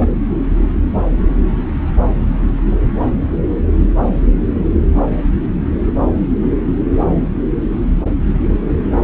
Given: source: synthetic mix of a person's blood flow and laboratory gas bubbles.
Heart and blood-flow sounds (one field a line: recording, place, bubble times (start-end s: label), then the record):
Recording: Doppler ultrasound of blood flow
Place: subclavian vein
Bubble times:
0.00-0.15 s: bubbles
From the record:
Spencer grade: 2 (many but less than half of the cardiac periods contain bubble signals, singularly or in groups)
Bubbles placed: anywhere in the cardiac cycle